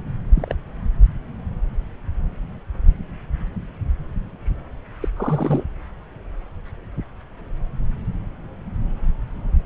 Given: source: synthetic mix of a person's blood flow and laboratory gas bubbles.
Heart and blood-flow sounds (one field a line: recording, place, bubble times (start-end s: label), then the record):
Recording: Doppler ultrasound of blood flow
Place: subclavian vein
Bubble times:
0.35-0.55 s: bubbles
5.00-5.08 s: bubbles
5.16-5.64 s: bubbles
From the record:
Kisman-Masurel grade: 221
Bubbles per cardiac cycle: several, 3 to 8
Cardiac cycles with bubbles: 10 to 50%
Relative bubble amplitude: barely perceptible (0.100 to 0.250)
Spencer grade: 2 (many but less than half of the cardiac periods contain bubble signals, singularly or in groups)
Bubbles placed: anywhere in the cardiac cycle